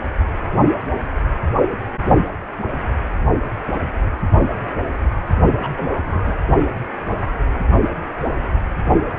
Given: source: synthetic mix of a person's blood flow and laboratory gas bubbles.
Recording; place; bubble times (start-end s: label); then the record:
Doppler ultrasound of blood flow; precordium
5.62-5.71 s: bubbles
5.77-6.36 s: bubbles
From the record:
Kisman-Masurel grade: 112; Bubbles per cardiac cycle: 1 to 2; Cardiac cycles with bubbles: 1 to 10%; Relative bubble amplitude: moderate (0.250 to 0.450); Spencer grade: 1 (occasional bubble signal discernible with the cardiac motion signal, with majority of cardiac periods free of bubbles); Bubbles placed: only in the low amplitude regions of the cardiac cycle